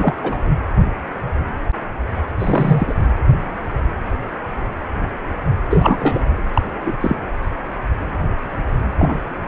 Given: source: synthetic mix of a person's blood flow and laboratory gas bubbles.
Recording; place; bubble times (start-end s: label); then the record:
Doppler ultrasound of blood flow; precordium
0.00-0.15 s: bubbles
0.22-0.38 s: bubbles
2.39-2.94 s: bubbles
5.70-6.25 s: bubbles
6.54-6.61 s: bubbles
6.86-6.97 s: bubbles
7.00-7.16 s: bubbles
8.98-9.23 s: bubbles
From the record:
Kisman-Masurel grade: 223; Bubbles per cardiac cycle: several, 3 to 8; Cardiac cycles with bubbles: 10 to 50%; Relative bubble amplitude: loud (0.450 to 0.775); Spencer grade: 2 (many but less than half of the cardiac periods contain bubble signals, singularly or in groups); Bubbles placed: anywhere in the cardiac cycle